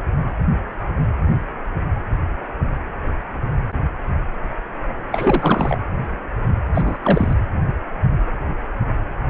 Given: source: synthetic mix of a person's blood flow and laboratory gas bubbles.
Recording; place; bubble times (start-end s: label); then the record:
Doppler ultrasound of blood flow; precordium
5.12-5.78 s: bubbles
6.74-6.98 s: bubbles
7.02-7.33 s: bubbles
From the record:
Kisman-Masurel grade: 223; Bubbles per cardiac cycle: several, 3 to 8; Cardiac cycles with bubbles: 10 to 50%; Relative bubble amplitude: loud (0.450 to 0.775); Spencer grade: 2 (many but less than half of the cardiac periods contain bubble signals, singularly or in groups); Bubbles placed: anywhere in the cardiac cycle